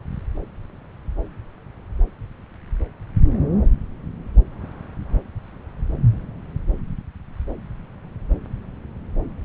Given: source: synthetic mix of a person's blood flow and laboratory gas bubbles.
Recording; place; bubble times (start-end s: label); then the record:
Doppler ultrasound of blood flow; subclavian vein
no bubbles
From the record:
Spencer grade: 0 (complete lack of bubble signals)